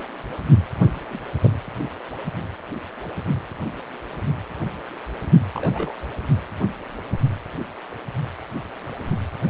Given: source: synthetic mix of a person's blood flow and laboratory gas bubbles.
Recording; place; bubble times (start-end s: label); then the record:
Doppler ultrasound of blood flow; precordium
1.09-1.18 s: bubbles
1.42-1.50 s: bubbles
5.55-5.96 s: bubbles
From the record:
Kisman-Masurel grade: 121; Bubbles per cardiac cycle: 1 to 2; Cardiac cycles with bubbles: 10 to 50%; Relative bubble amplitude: barely perceptible (0.100 to 0.250); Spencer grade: 2 (many but less than half of the cardiac periods contain bubble signals, singularly or in groups); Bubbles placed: only in the low amplitude regions of the cardiac cycle